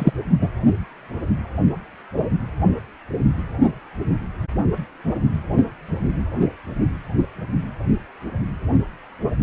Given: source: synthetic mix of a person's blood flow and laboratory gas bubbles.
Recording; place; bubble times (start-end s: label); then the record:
Doppler ultrasound of blood flow; precordium
0.00-0.11 s: bubbles
0.41-0.49 s: bubbles
From the record:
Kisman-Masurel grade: 213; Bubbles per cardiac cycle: several, 3 to 8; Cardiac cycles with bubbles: 1 to 10%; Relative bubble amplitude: loud (0.450 to 0.775); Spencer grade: 1 (occasional bubble signal discernible with the cardiac motion signal, with majority of cardiac periods free of bubbles); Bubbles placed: anywhere in the cardiac cycle